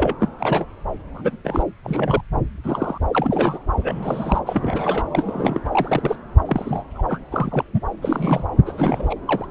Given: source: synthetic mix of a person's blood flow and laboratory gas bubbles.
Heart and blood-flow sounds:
Doppler ultrasound of blood flow; subclavian vein
0.00-0.15 s: bubbles
0.20-0.29 s: bubbles
0.39-0.65 s: bubbles
1.14-1.36 s: bubbles
1.44-1.63 s: bubbles
1.83-2.21 s: bubbles
2.64-2.98 s: bubbles
3.12-3.59 s: bubbles
3.81-4.39 s: bubbles
4.46-5.04 s: bubbles
5.11-5.60 s: bubbles
5.71-6.16 s: bubbles
6.46-6.83 s: bubbles
6.94-7.02 s: bubbles
7.08-7.19 s: bubbles
7.31-7.65 s: bubbles
7.74-7.81 s: bubbles
8.01-8.45 s: bubbles
8.66-9.15 s: bubbles
9.25-9.51 s: bubbles
From the record:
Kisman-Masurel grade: 242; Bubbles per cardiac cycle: several, 3 to 8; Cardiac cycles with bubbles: 100%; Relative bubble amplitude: moderate (0.250 to 0.450); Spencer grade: 3 (all of the cardiac periods contain showers or single bubble signals, but not dominating or overriding the cardiac motion signals); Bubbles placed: anywhere in the cardiac cycle

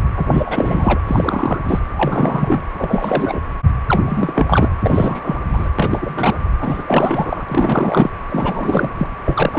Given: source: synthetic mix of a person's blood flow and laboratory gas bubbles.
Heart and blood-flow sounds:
Doppler ultrasound of blood flow; precordium
0.16-0.26 s: bubbles
0.31-0.42 s: bubbles
0.45-0.99 s: bubbles
1.06-1.58 s: bubbles
1.64-1.80 s: bubbles
1.94-2.64 s: bubbles
2.79-3.40 s: bubbles
3.88-4.02 s: bubbles
4.06-4.68 s: bubbles
4.82-5.41 s: bubbles
5.53-5.68 s: bubbles
5.79-6.38 s: bubbles
6.60-6.84 s: bubbles
6.86-7.44 s: bubbles
7.48-8.10 s: bubbles
8.30-8.90 s: bubbles
8.97-9.07 s: bubbles
9.25-9.59 s: bubbles
From the record:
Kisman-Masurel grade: 342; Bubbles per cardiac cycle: rolling drumbeat, 9 or more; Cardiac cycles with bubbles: 100%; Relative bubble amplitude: moderate (0.250 to 0.450); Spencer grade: 3 (all of the cardiac periods contain showers or single bubble signals, but not dominating or overriding the cardiac motion signals); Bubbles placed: anywhere in the cardiac cycle

